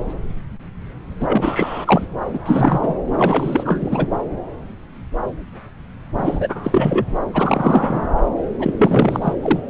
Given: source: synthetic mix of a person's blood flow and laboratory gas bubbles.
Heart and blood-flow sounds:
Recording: Doppler ultrasound of blood flow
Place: subclavian vein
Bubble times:
1.20-2.03 s: bubbles
2.33-2.38 s: bubbles
2.46-2.95 s: bubbles
3.15-4.07 s: bubbles
6.17-7.05 s: bubbles
7.33-8.07 s: bubbles
8.59-8.74 s: bubbles
8.79-9.33 s: bubbles
9.41-9.60 s: bubbles
From the record:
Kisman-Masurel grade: 333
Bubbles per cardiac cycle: rolling drumbeat, 9 or more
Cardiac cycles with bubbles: 50 to 99%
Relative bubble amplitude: loud (0.450 to 0.775)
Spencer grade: 3 (all of the cardiac periods contain showers or single bubble signals, but not dominating or overriding the cardiac motion signals)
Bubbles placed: anywhere in the cardiac cycle

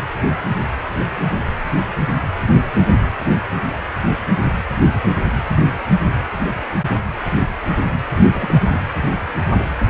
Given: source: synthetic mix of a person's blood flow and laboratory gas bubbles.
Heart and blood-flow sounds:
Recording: Doppler ultrasound of blood flow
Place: precordium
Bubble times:
8.17-8.22 s: bubbles
8.35-8.62 s: bubbles
8.66-8.83 s: bubbles
From the record:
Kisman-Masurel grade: 211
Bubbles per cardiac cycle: several, 3 to 8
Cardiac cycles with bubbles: 1 to 10%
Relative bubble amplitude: barely perceptible (0.100 to 0.250)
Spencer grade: 1 (occasional bubble signal discernible with the cardiac motion signal, with majority of cardiac periods free of bubbles)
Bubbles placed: anywhere in the cardiac cycle

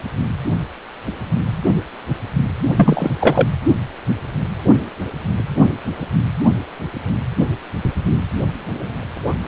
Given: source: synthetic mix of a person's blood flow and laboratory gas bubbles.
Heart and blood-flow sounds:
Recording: Doppler ultrasound of blood flow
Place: precordium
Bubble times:
2.75-3.11 s: bubbles
3.19-3.48 s: bubbles
From the record:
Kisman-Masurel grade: 213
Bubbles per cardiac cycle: several, 3 to 8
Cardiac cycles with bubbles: 1 to 10%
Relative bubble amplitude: loud (0.450 to 0.775)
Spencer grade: 1 (occasional bubble signal discernible with the cardiac motion signal, with majority of cardiac periods free of bubbles)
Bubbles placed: anywhere in the cardiac cycle

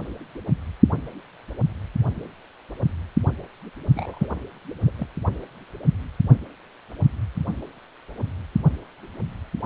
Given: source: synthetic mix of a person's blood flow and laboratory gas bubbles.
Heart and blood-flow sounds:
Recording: Doppler ultrasound of blood flow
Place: precordium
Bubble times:
3.94-4.29 s: bubbles
4.86-4.90 s: bubbles
4.97-5.07 s: bubbles
From the record:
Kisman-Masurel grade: 211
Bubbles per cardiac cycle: several, 3 to 8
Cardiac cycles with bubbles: 1 to 10%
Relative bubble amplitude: barely perceptible (0.100 to 0.250)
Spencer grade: 1 (occasional bubble signal discernible with the cardiac motion signal, with majority of cardiac periods free of bubbles)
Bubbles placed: only in the low amplitude regions of the cardiac cycle

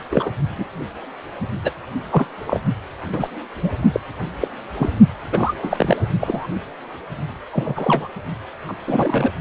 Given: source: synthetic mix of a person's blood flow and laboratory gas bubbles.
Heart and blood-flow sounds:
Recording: Doppler ultrasound of blood flow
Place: precordium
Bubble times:
0.11-0.29 s: bubbles
0.57-0.65 s: bubbles
1.64-1.70 s: bubbles
2.11-2.25 s: bubbles
2.47-2.60 s: bubbles
3.12-3.29 s: bubbles
3.63-3.70 s: bubbles
3.93-4.00 s: bubbles
4.40-4.48 s: bubbles
4.76-4.89 s: bubbles
5.31-5.54 s: bubbles
5.62-5.97 s: bubbles
6.21-6.47 s: bubbles
7.52-8.08 s: bubbles
8.68-8.74 s: bubbles
8.87-9.31 s: bubbles
From the record:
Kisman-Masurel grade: 242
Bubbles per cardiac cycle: several, 3 to 8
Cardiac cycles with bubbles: 100%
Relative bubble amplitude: moderate (0.250 to 0.450)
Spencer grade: 3 (all of the cardiac periods contain showers or single bubble signals, but not dominating or overriding the cardiac motion signals)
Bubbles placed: only in the low amplitude regions of the cardiac cycle

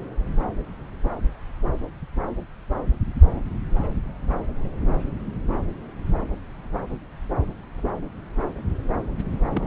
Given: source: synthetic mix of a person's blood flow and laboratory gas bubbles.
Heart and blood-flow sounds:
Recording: Doppler ultrasound of blood flow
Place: subclavian vein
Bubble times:
9.54-9.67 s: bubbles
From the record:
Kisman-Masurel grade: 211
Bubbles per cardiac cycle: several, 3 to 8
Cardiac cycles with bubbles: 1 to 10%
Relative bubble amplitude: barely perceptible (0.100 to 0.250)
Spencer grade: 1 (occasional bubble signal discernible with the cardiac motion signal, with majority of cardiac periods free of bubbles)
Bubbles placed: anywhere in the cardiac cycle

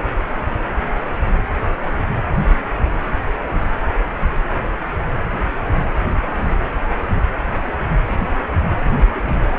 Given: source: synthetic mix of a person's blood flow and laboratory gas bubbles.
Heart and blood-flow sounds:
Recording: Doppler ultrasound of blood flow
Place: precordium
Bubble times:
8.97-9.06 s: bubbles
9.14-9.31 s: bubbles
From the record:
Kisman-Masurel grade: 211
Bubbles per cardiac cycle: several, 3 to 8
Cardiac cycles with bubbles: 1 to 10%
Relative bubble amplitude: barely perceptible (0.100 to 0.250)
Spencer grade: 1 (occasional bubble signal discernible with the cardiac motion signal, with majority of cardiac periods free of bubbles)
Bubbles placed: anywhere in the cardiac cycle

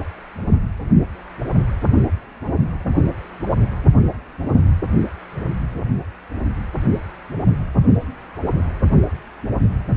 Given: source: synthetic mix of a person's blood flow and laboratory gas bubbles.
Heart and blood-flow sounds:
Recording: Doppler ultrasound of blood flow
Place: precordium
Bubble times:
no bubbles
From the record:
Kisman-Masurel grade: 000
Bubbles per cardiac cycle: 0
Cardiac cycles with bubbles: 0%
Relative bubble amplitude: no bubbles discernible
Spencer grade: 0 (complete lack of bubble signals)

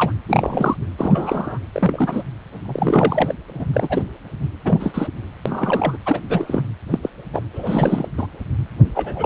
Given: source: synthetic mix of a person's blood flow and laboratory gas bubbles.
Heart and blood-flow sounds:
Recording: Doppler ultrasound of blood flow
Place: precordium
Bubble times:
0.00-0.12 s: bubbles
0.28-0.76 s: bubbles
0.98-1.58 s: bubbles
1.73-2.23 s: bubbles
2.65-3.35 s: bubbles
3.48-3.51 s: bubbles
3.54-3.65 s: bubbles
3.73-4.04 s: bubbles
4.64-5.08 s: bubbles
5.46-5.97 s: bubbles
6.05-6.21 s: bubbles
6.29-6.62 s: bubbles
6.90-6.98 s: bubbles
7.02-7.10 s: bubbles
7.33-7.42 s: bubbles
7.53-8.09 s: bubbles
8.18-8.27 s: bubbles
8.95-9.26 s: bubbles
From the record:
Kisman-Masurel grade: 243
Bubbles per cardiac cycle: several, 3 to 8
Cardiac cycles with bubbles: 100%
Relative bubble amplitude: loud (0.450 to 0.775)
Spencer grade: 3 (all of the cardiac periods contain showers or single bubble signals, but not dominating or overriding the cardiac motion signals)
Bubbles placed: anywhere in the cardiac cycle

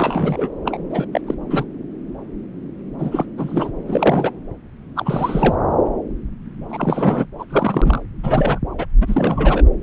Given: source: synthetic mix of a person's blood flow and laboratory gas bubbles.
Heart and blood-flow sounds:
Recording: Doppler ultrasound of blood flow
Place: subclavian vein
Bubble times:
0.00-0.49 s: bubbles
0.65-0.78 s: bubbles
0.90-1.05 s: bubbles
1.13-1.20 s: bubbles
1.26-1.34 s: bubbles
1.50-1.65 s: bubbles
2.99-3.26 s: bubbles
3.38-3.71 s: bubbles
3.87-4.30 s: bubbles
4.96-5.55 s: bubbles
6.69-7.26 s: bubbles
7.39-7.44 s: bubbles
7.50-8.03 s: bubbles
8.23-8.58 s: bubbles
8.78-8.86 s: bubbles
9.01-9.62 s: bubbles
From the record:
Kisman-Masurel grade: 332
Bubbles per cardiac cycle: rolling drumbeat, 9 or more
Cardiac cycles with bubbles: 50 to 99%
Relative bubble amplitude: moderate (0.250 to 0.450)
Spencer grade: 3 (all of the cardiac periods contain showers or single bubble signals, but not dominating or overriding the cardiac motion signals)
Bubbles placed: anywhere in the cardiac cycle

